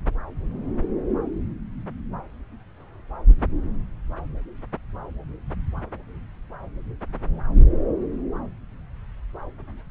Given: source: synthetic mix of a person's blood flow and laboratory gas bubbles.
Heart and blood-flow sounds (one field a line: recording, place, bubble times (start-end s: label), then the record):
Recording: Doppler ultrasound of blood flow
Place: subclavian vein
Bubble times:
no bubbles
From the record:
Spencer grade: 0 (complete lack of bubble signals)